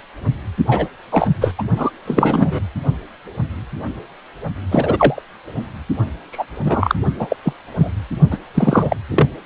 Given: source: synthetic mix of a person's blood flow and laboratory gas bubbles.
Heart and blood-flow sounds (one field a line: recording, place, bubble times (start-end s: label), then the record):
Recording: Doppler ultrasound of blood flow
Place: precordium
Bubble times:
0.66-0.87 s: bubbles
1.12-1.29 s: bubbles
1.40-1.54 s: bubbles
1.58-1.62 s: bubbles
1.76-1.91 s: bubbles
2.05-2.60 s: bubbles
4.71-5.22 s: bubbles
6.32-6.46 s: bubbles
6.65-6.95 s: bubbles
7.19-7.27 s: bubbles
7.29-7.36 s: bubbles
7.42-7.53 s: bubbles
7.77-7.91 s: bubbles
8.31-8.38 s: bubbles
8.54-8.96 s: bubbles
9.11-9.28 s: bubbles
From the record:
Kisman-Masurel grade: 233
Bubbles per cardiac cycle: several, 3 to 8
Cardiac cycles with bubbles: 50 to 99%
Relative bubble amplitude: loud (0.450 to 0.775)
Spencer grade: 3 (all of the cardiac periods contain showers or single bubble signals, but not dominating or overriding the cardiac motion signals)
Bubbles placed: only in the low amplitude regions of the cardiac cycle